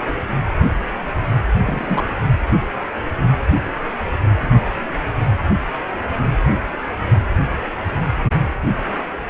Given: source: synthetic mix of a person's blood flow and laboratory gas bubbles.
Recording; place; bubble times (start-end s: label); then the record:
Doppler ultrasound of blood flow; precordium
1.60-2.04 s: bubbles
From the record:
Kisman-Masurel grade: 212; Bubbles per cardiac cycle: several, 3 to 8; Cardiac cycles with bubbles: 1 to 10%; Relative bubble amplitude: moderate (0.250 to 0.450); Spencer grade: 1 (occasional bubble signal discernible with the cardiac motion signal, with majority of cardiac periods free of bubbles); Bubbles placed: anywhere in the cardiac cycle